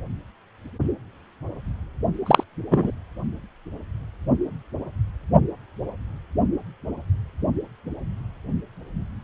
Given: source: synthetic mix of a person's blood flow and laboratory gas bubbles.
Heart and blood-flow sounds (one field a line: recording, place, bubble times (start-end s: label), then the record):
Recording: Doppler ultrasound of blood flow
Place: precordium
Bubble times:
2.26-2.44 s: bubbles
2.71-2.91 s: bubbles
From the record:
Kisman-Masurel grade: 113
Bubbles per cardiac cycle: 1 to 2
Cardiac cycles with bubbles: 1 to 10%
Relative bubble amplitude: loud (0.450 to 0.775)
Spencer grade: 1 (occasional bubble signal discernible with the cardiac motion signal, with majority of cardiac periods free of bubbles)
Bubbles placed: anywhere in the cardiac cycle